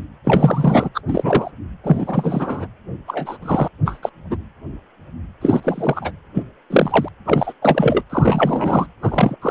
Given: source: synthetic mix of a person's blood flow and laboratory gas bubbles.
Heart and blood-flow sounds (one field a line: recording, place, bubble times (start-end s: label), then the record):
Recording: Doppler ultrasound of blood flow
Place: precordium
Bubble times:
0.24-0.89 s: bubbles
0.94-1.00 s: bubbles
1.07-1.51 s: bubbles
1.83-2.67 s: bubbles
3.07-3.38 s: bubbles
3.42-3.68 s: bubbles
3.85-3.99 s: bubbles
4.03-4.10 s: bubbles
4.30-4.37 s: bubbles
5.41-6.12 s: bubbles
6.34-6.43 s: bubbles
6.70-7.08 s: bubbles
7.25-7.53 s: bubbles
7.62-8.03 s: bubbles
8.10-8.87 s: bubbles
9.02-9.36 s: bubbles
9.41-9.51 s: bubbles
From the record:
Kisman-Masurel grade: 233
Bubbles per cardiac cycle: several, 3 to 8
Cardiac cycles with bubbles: 50 to 99%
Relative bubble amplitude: loud (0.450 to 0.775)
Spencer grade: 3 (all of the cardiac periods contain showers or single bubble signals, but not dominating or overriding the cardiac motion signals)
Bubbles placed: anywhere in the cardiac cycle